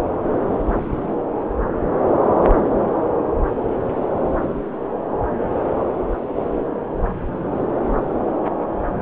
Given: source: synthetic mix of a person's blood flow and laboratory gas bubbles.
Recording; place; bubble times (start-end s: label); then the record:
Doppler ultrasound of blood flow; subclavian vein
no bubbles
From the record:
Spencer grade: 0 (complete lack of bubble signals)